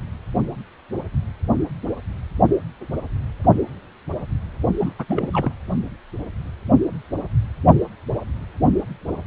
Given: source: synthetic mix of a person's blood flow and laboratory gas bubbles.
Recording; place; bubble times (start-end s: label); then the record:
Doppler ultrasound of blood flow; precordium
4.79-4.93 s: bubbles
4.98-5.05 s: bubbles
5.08-5.29 s: bubbles
5.33-5.52 s: bubbles
From the record:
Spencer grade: 1 (occasional bubble signal discernible with the cardiac motion signal, with majority of cardiac periods free of bubbles); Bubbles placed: only in the low amplitude regions of the cardiac cycle